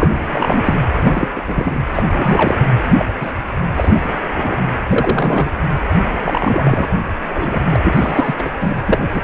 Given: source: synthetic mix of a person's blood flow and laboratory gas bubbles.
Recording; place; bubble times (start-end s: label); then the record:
Doppler ultrasound of blood flow; precordium
0.00-0.74 s: bubbles
0.99-1.29 s: bubbles
1.35-1.79 s: bubbles
1.93-2.05 s: bubbles
2.10-2.56 s: bubbles
2.85-3.06 s: bubbles
3.21-3.32 s: bubbles
3.76-4.26 s: bubbles
4.35-4.67 s: bubbles
4.89-5.49 s: bubbles
6.22-6.88 s: bubbles
7.30-7.61 s: bubbles
7.70-7.79 s: bubbles
7.83-8.34 s: bubbles
8.38-8.49 s: bubbles
8.60-8.80 s: bubbles
8.87-9.01 s: bubbles
9.13-9.22 s: bubbles
From the record:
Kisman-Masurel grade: 243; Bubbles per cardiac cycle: several, 3 to 8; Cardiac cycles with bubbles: 100%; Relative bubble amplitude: loud (0.450 to 0.775); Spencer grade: 3 (all of the cardiac periods contain showers or single bubble signals, but not dominating or overriding the cardiac motion signals); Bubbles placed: anywhere in the cardiac cycle